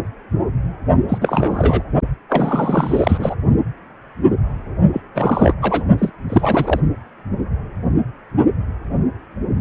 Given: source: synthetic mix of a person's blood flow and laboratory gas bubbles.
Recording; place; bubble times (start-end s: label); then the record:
Doppler ultrasound of blood flow; precordium
1.08-1.18 s: bubbles
1.21-1.83 s: bubbles
2.29-3.35 s: bubbles
4.92-5.01 s: bubbles
5.15-5.54 s: bubbles
5.62-5.84 s: bubbles
5.98-6.10 s: bubbles
6.29-6.80 s: bubbles
From the record:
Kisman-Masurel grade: 333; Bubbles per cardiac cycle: rolling drumbeat, 9 or more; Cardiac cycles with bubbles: 50 to 99%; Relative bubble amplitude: loud (0.450 to 0.775); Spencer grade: 3 (all of the cardiac periods contain showers or single bubble signals, but not dominating or overriding the cardiac motion signals); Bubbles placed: only in the low amplitude regions of the cardiac cycle